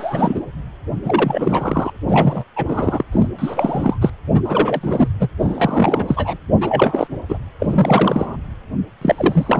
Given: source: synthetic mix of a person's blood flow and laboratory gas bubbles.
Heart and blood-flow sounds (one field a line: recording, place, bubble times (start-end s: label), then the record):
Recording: Doppler ultrasound of blood flow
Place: precordium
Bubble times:
0.00-0.41 s: bubbles
1.04-1.92 s: bubbles
2.07-2.44 s: bubbles
2.56-3.03 s: bubbles
3.11-3.27 s: bubbles
3.38-3.98 s: bubbles
4.01-4.10 s: bubbles
4.33-4.41 s: bubbles
4.44-5.08 s: bubbles
5.19-5.31 s: bubbles
5.39-6.37 s: bubbles
6.60-7.08 s: bubbles
7.29-7.39 s: bubbles
7.60-8.37 s: bubbles
9.01-9.60 s: bubbles
From the record:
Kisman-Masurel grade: 343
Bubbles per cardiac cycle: rolling drumbeat, 9 or more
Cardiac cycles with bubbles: 100%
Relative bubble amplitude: loud (0.450 to 0.775)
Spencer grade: 3 (all of the cardiac periods contain showers or single bubble signals, but not dominating or overriding the cardiac motion signals)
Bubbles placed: anywhere in the cardiac cycle